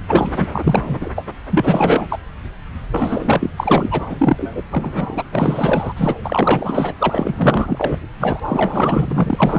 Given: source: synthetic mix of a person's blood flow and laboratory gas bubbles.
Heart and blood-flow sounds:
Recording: Doppler ultrasound of blood flow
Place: subclavian vein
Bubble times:
0.07-0.49 s: bubbles
0.52-1.09 s: bubbles
1.15-1.26 s: bubbles
1.51-2.06 s: bubbles
2.10-2.18 s: bubbles
2.91-3.50 s: bubbles
3.57-4.06 s: bubbles
4.09-4.61 s: bubbles
4.71-5.23 s: bubbles
5.31-5.92 s: bubbles
5.96-6.14 s: bubbles
6.24-6.94 s: bubbles
6.99-7.98 s: bubbles
8.20-8.40 s: bubbles
8.43-9.58 s: bubbles
From the record:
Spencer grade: 4 (maximum detectable bubble signal sounding continuously throughout systole and diastole of every cardiac period, and overriding the amplitude of the normal cardiac signals)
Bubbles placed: anywhere in the cardiac cycle

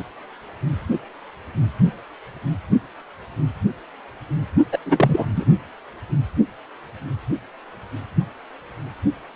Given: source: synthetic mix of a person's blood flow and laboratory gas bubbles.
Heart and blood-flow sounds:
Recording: Doppler ultrasound of blood flow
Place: precordium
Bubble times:
4.72-4.78 s: bubbles
4.85-5.26 s: bubbles
5.36-5.44 s: bubbles
From the record:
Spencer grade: 1 (occasional bubble signal discernible with the cardiac motion signal, with majority of cardiac periods free of bubbles)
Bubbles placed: anywhere in the cardiac cycle

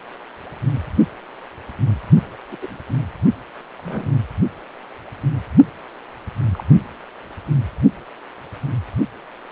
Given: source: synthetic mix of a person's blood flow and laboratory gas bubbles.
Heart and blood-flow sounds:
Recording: Doppler ultrasound of blood flow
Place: precordium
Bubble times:
2.52-2.58 s: bubbles
2.62-2.77 s: bubbles
3.79-3.82 s: bubbles
3.84-4.12 s: bubbles
6.53-6.63 s: bubbles
From the record:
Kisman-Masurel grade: 121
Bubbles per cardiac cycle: 1 to 2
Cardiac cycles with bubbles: 10 to 50%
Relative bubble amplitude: barely perceptible (0.100 to 0.250)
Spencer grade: 2 (many but less than half of the cardiac periods contain bubble signals, singularly or in groups)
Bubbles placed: only in the low amplitude regions of the cardiac cycle

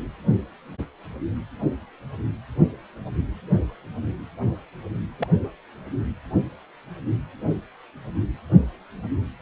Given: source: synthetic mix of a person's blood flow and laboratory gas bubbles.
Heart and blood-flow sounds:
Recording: Doppler ultrasound of blood flow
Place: precordium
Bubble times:
5.18-5.27 s: bubbles
5.40-5.49 s: bubbles
From the record:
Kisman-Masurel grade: 121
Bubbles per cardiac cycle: 1 to 2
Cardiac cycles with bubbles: 10 to 50%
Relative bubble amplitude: barely perceptible (0.100 to 0.250)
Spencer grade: 2 (many but less than half of the cardiac periods contain bubble signals, singularly or in groups)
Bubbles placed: anywhere in the cardiac cycle

